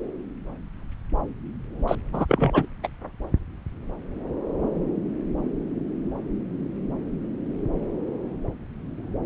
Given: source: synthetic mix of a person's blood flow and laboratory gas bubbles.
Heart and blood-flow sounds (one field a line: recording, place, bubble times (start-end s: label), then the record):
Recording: Doppler ultrasound of blood flow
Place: subclavian vein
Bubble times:
1.88-1.96 s: bubbles
2.12-2.25 s: bubbles
2.29-2.66 s: bubbles
2.83-2.88 s: bubbles
From the record:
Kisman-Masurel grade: 212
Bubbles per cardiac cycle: several, 3 to 8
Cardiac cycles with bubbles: 1 to 10%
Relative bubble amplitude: moderate (0.250 to 0.450)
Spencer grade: 1 (occasional bubble signal discernible with the cardiac motion signal, with majority of cardiac periods free of bubbles)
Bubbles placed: anywhere in the cardiac cycle